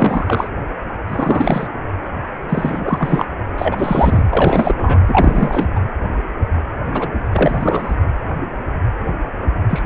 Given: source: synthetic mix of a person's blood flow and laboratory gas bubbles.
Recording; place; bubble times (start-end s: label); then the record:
Doppler ultrasound of blood flow; precordium
0.00-0.51 s: bubbles
1.07-1.68 s: bubbles
2.49-3.26 s: bubbles
3.58-4.25 s: bubbles
4.29-4.97 s: bubbles
5.07-5.68 s: bubbles
5.75-5.81 s: bubbles
6.93-7.09 s: bubbles
7.33-7.95 s: bubbles
9.69-9.82 s: bubbles
From the record:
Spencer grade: 3 (all of the cardiac periods contain showers or single bubble signals, but not dominating or overriding the cardiac motion signals); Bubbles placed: anywhere in the cardiac cycle